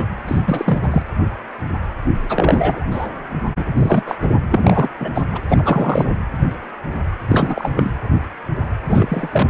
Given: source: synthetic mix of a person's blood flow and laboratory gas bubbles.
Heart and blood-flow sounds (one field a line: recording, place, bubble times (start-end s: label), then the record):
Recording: Doppler ultrasound of blood flow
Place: precordium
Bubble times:
0.00-0.06 s: bubbles
0.27-0.78 s: bubbles
0.83-1.02 s: bubbles
2.29-2.85 s: bubbles
2.91-3.07 s: bubbles
3.56-3.65 s: bubbles
3.77-4.03 s: bubbles
4.06-4.16 s: bubbles
4.21-4.42 s: bubbles
4.51-4.89 s: bubbles
5.00-5.10 s: bubbles
5.14-5.25 s: bubbles
5.32-5.41 s: bubbles
5.50-6.06 s: bubbles
7.27-7.71 s: bubbles
7.75-7.92 s: bubbles
8.87-9.50 s: bubbles
From the record:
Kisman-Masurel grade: 333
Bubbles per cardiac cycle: rolling drumbeat, 9 or more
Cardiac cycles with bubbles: 50 to 99%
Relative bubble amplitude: loud (0.450 to 0.775)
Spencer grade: 3 (all of the cardiac periods contain showers or single bubble signals, but not dominating or overriding the cardiac motion signals)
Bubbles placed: anywhere in the cardiac cycle